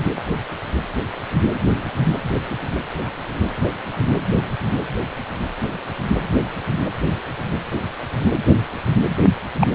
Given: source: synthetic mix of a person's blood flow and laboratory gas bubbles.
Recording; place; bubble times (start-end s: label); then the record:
Doppler ultrasound of blood flow; precordium
9.61-9.68 s: bubbles
From the record:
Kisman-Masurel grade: 122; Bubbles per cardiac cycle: 1 to 2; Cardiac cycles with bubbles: 10 to 50%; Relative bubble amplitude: moderate (0.250 to 0.450); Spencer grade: 2 (many but less than half of the cardiac periods contain bubble signals, singularly or in groups); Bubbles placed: anywhere in the cardiac cycle